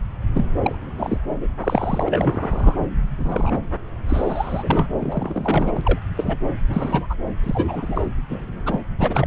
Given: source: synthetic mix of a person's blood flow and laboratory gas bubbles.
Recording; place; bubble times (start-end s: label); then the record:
Doppler ultrasound of blood flow; subclavian vein
0.34-0.45 s: bubbles
0.62-0.75 s: bubbles
0.96-1.17 s: bubbles
1.41-1.48 s: bubbles
1.60-2.76 s: bubbles
3.18-3.60 s: bubbles
4.08-4.87 s: bubbles
5.00-6.00 s: bubbles
6.17-6.37 s: bubbles
6.68-7.07 s: bubbles
7.09-7.15 s: bubbles
7.43-8.01 s: bubbles
8.29-8.46 s: bubbles
8.65-8.80 s: bubbles
8.98-9.26 s: bubbles
From the record:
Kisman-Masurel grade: 242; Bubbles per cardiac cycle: several, 3 to 8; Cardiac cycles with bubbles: 100%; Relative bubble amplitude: moderate (0.250 to 0.450); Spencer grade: 3 (all of the cardiac periods contain showers or single bubble signals, but not dominating or overriding the cardiac motion signals); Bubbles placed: anywhere in the cardiac cycle